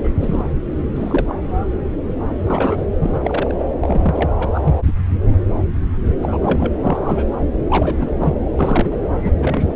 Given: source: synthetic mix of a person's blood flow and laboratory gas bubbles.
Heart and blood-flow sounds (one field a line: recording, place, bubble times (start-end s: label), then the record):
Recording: Doppler ultrasound of blood flow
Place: subclavian vein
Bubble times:
0.04-0.10 s: bubbles
0.20-0.45 s: bubbles
0.95-1.38 s: bubbles
2.46-2.85 s: bubbles
3.00-3.20 s: bubbles
3.24-3.65 s: bubbles
3.80-4.30 s: bubbles
4.39-4.49 s: bubbles
4.54-4.60 s: bubbles
4.63-4.75 s: bubbles
4.83-4.92 s: bubbles
6.22-6.38 s: bubbles
6.42-6.72 s: bubbles
6.81-7.26 s: bubbles
7.70-7.96 s: bubbles
7.99-8.15 s: bubbles
8.20-8.35 s: bubbles
8.58-8.99 s: bubbles
9.23-9.33 s: bubbles
9.38-9.76 s: bubbles
From the record:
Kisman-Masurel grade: 232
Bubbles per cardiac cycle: several, 3 to 8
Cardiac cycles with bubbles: 50 to 99%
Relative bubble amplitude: moderate (0.250 to 0.450)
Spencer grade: 3 (all of the cardiac periods contain showers or single bubble signals, but not dominating or overriding the cardiac motion signals)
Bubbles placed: anywhere in the cardiac cycle